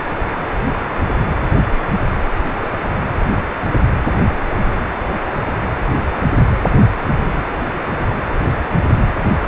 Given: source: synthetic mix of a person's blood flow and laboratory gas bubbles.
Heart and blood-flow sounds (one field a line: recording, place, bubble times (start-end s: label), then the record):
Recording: Doppler ultrasound of blood flow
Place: precordium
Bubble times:
2.55-2.73 s: bubbles
2.90-2.95 s: bubbles
From the record:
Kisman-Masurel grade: 111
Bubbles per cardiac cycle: 1 to 2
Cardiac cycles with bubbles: 1 to 10%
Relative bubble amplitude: barely perceptible (0.100 to 0.250)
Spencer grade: 1 (occasional bubble signal discernible with the cardiac motion signal, with majority of cardiac periods free of bubbles)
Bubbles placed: anywhere in the cardiac cycle